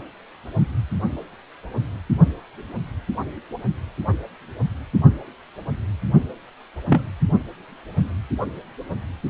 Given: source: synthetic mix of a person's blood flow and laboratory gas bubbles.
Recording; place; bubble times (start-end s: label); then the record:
Doppler ultrasound of blood flow; precordium
6.89-7.03 s: bubbles
From the record:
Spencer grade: 2 (many but less than half of the cardiac periods contain bubble signals, singularly or in groups); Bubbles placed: only in the low amplitude regions of the cardiac cycle